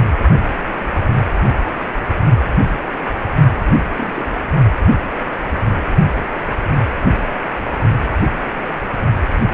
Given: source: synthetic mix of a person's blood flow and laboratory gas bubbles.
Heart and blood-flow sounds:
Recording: Doppler ultrasound of blood flow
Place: precordium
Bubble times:
3.96-4.25 s: bubbles
From the record:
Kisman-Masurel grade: 111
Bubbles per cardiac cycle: 1 to 2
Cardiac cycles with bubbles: 1 to 10%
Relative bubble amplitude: barely perceptible (0.100 to 0.250)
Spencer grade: 1 (occasional bubble signal discernible with the cardiac motion signal, with majority of cardiac periods free of bubbles)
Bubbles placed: only in the low amplitude regions of the cardiac cycle

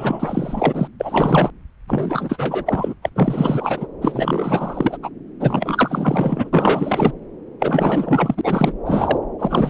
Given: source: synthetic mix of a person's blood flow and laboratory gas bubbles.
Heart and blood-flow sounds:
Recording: Doppler ultrasound of blood flow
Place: subclavian vein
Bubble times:
0.00-0.87 s: bubbles
0.99-1.50 s: bubbles
1.88-2.94 s: bubbles
3.02-3.09 s: bubbles
3.15-3.86 s: bubbles
4.02-4.98 s: bubbles
5.03-5.10 s: bubbles
5.40-6.50 s: bubbles
6.53-7.12 s: bubbles
7.60-8.34 s: bubbles
8.37-8.72 s: bubbles
8.85-9.18 s: bubbles
9.38-9.70 s: bubbles
From the record:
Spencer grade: 4 (maximum detectable bubble signal sounding continuously throughout systole and diastole of every cardiac period, and overriding the amplitude of the normal cardiac signals)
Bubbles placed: anywhere in the cardiac cycle

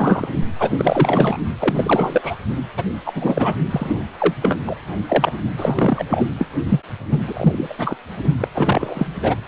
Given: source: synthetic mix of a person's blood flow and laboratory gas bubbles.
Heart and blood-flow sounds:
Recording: Doppler ultrasound of blood flow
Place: precordium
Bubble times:
0.00-0.28 s: bubbles
0.58-1.38 s: bubbles
1.58-2.36 s: bubbles
2.77-2.84 s: bubbles
3.05-3.55 s: bubbles
3.71-3.97 s: bubbles
4.19-4.34 s: bubbles
4.42-4.60 s: bubbles
4.66-4.76 s: bubbles
5.08-5.33 s: bubbles
5.56-6.05 s: bubbles
6.08-6.27 s: bubbles
6.38-6.49 s: bubbles
6.68-6.80 s: bubbles
7.11-7.19 s: bubbles
7.27-7.74 s: bubbles
7.78-7.98 s: bubbles
8.40-8.48 s: bubbles
8.54-9.07 s: bubbles
9.22-9.36 s: bubbles
From the record:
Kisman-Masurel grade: 333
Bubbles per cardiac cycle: rolling drumbeat, 9 or more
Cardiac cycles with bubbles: 50 to 99%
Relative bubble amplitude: loud (0.450 to 0.775)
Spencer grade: 3 (all of the cardiac periods contain showers or single bubble signals, but not dominating or overriding the cardiac motion signals)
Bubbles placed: only in the low amplitude regions of the cardiac cycle

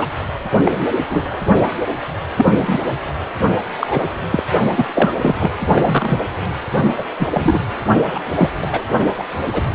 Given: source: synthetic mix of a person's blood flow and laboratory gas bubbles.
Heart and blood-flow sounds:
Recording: Doppler ultrasound of blood flow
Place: precordium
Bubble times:
0.00-0.06 s: bubbles
0.65-0.97 s: bubbles
1.10-1.38 s: bubbles
2.36-2.53 s: bubbles
2.57-2.80 s: bubbles
3.80-4.10 s: bubbles
4.29-4.43 s: bubbles
4.76-4.86 s: bubbles
4.95-5.13 s: bubbles
5.21-5.35 s: bubbles
5.38-5.51 s: bubbles
5.75-5.82 s: bubbles
5.85-6.21 s: bubbles
6.97-7.06 s: bubbles
7.19-7.29 s: bubbles
7.33-7.58 s: bubbles
8.07-8.21 s: bubbles
8.34-8.50 s: bubbles
8.62-8.83 s: bubbles
9.16-9.24 s: bubbles
9.52-9.62 s: bubbles
From the record:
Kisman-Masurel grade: 233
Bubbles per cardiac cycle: several, 3 to 8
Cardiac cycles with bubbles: 50 to 99%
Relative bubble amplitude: loud (0.450 to 0.775)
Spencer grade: 3 (all of the cardiac periods contain showers or single bubble signals, but not dominating or overriding the cardiac motion signals)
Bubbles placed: only in the low amplitude regions of the cardiac cycle

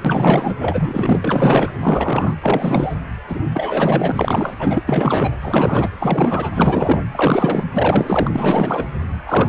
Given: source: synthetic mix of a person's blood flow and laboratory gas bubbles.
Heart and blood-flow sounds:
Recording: Doppler ultrasound of blood flow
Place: precordium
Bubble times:
0.04-0.54 s: bubbles
0.60-1.72 s: bubbles
1.80-2.36 s: bubbles
2.42-2.95 s: bubbles
3.29-3.45 s: bubbles
3.53-4.83 s: bubbles
4.88-5.33 s: bubbles
5.41-5.89 s: bubbles
5.99-6.50 s: bubbles
6.54-7.00 s: bubbles
7.12-7.65 s: bubbles
7.73-8.31 s: bubbles
8.35-8.86 s: bubbles
9.26-9.48 s: bubbles
From the record:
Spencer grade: 4 (maximum detectable bubble signal sounding continuously throughout systole and diastole of every cardiac period, and overriding the amplitude of the normal cardiac signals)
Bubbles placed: anywhere in the cardiac cycle

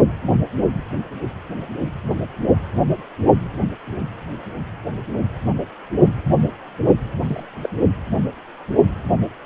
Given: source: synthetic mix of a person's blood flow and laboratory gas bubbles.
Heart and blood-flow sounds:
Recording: Doppler ultrasound of blood flow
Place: precordium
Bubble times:
7.27-7.43 s: bubbles
7.61-7.69 s: bubbles
From the record:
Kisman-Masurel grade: 112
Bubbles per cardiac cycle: 1 to 2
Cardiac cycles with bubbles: 1 to 10%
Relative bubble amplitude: moderate (0.250 to 0.450)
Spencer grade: 1 (occasional bubble signal discernible with the cardiac motion signal, with majority of cardiac periods free of bubbles)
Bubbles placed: only in the low amplitude regions of the cardiac cycle

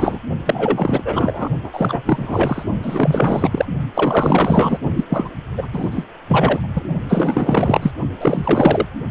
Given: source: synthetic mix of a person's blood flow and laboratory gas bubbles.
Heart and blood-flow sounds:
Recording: Doppler ultrasound of blood flow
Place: precordium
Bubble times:
0.00-0.20 s: bubbles
0.46-1.48 s: bubbles
1.64-2.02 s: bubbles
2.05-2.63 s: bubbles
2.82-3.65 s: bubbles
3.94-4.78 s: bubbles
4.96-5.04 s: bubbles
5.09-5.31 s: bubbles
5.57-5.67 s: bubbles
5.73-6.07 s: bubbles
6.28-6.83 s: bubbles
7.08-7.92 s: bubbles
8.20-8.87 s: bubbles
From the record:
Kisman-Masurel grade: 444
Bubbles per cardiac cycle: continuous sound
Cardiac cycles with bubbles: 100%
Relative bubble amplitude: maximal (0.775 to 0.999)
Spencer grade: 4 (maximum detectable bubble signal sounding continuously throughout systole and diastole of every cardiac period, and overriding the amplitude of the normal cardiac signals)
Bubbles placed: only in the low amplitude regions of the cardiac cycle

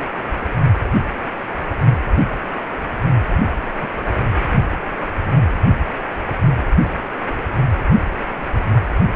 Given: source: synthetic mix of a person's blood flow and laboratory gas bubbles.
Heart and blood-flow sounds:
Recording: Doppler ultrasound of blood flow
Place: precordium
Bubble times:
3.80-3.89 s: bubbles
3.96-4.04 s: bubbles
From the record:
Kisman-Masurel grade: 112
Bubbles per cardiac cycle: 1 to 2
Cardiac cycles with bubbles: 1 to 10%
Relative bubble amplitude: moderate (0.250 to 0.450)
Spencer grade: 1 (occasional bubble signal discernible with the cardiac motion signal, with majority of cardiac periods free of bubbles)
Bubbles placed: anywhere in the cardiac cycle

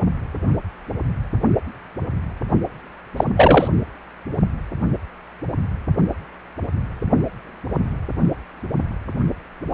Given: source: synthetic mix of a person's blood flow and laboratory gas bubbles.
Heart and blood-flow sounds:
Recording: Doppler ultrasound of blood flow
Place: precordium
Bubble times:
3.16-3.24 s: bubbles
3.37-3.68 s: bubbles
From the record:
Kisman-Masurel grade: 213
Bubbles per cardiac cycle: several, 3 to 8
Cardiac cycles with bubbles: 1 to 10%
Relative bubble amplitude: loud (0.450 to 0.775)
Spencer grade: 1 (occasional bubble signal discernible with the cardiac motion signal, with majority of cardiac periods free of bubbles)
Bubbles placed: only in the low amplitude regions of the cardiac cycle

